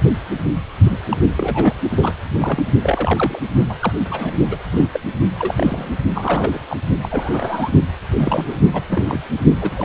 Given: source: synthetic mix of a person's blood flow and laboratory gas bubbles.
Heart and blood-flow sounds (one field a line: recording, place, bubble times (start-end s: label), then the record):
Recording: Doppler ultrasound of blood flow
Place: precordium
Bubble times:
0.91-1.02 s: bubbles
1.10-1.17 s: bubbles
1.24-1.75 s: bubbles
1.91-2.13 s: bubbles
2.33-2.63 s: bubbles
2.82-3.39 s: bubbles
3.69-3.75 s: bubbles
3.79-3.92 s: bubbles
4.09-4.34 s: bubbles
4.51-4.57 s: bubbles
4.72-4.87 s: bubbles
4.93-5.00 s: bubbles
5.39-5.90 s: bubbles
6.14-6.59 s: bubbles
6.69-6.77 s: bubbles
7.01-7.71 s: bubbles
8.19-8.56 s: bubbles
8.73-8.83 s: bubbles
8.89-9.20 s: bubbles
9.61-9.85 s: bubbles
From the record:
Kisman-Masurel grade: 242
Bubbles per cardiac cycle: several, 3 to 8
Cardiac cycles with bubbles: 100%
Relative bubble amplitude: moderate (0.250 to 0.450)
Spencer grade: 3 (all of the cardiac periods contain showers or single bubble signals, but not dominating or overriding the cardiac motion signals)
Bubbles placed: only in the low amplitude regions of the cardiac cycle